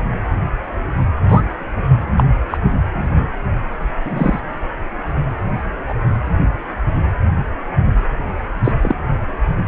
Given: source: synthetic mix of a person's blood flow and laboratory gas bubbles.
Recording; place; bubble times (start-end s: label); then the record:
Doppler ultrasound of blood flow; precordium
1.28-1.42 s: bubbles
2.17-2.25 s: bubbles
2.50-2.57 s: bubbles
2.94-3.27 s: bubbles
4.04-4.40 s: bubbles
5.89-5.95 s: bubbles
8.64-8.72 s: bubbles
8.83-8.95 s: bubbles
From the record:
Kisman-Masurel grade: 123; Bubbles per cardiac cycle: 1 to 2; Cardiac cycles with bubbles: 10 to 50%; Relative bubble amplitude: loud (0.450 to 0.775); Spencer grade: 2 (many but less than half of the cardiac periods contain bubble signals, singularly or in groups); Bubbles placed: anywhere in the cardiac cycle